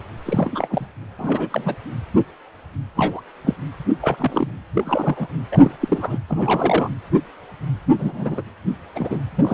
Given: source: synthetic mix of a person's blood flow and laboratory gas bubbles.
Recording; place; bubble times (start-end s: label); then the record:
Doppler ultrasound of blood flow; precordium
0.25-0.86 s: bubbles
1.18-1.76 s: bubbles
2.96-3.21 s: bubbles
3.44-3.54 s: bubbles
4.01-4.52 s: bubbles
4.74-5.28 s: bubbles
5.52-5.75 s: bubbles
5.81-6.20 s: bubbles
6.29-6.89 s: bubbles
7.98-8.43 s: bubbles
8.96-9.21 s: bubbles
9.37-9.54 s: bubbles
From the record:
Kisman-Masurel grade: 232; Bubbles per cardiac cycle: several, 3 to 8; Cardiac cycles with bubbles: 50 to 99%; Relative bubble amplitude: moderate (0.250 to 0.450); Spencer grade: 3 (all of the cardiac periods contain showers or single bubble signals, but not dominating or overriding the cardiac motion signals); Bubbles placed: anywhere in the cardiac cycle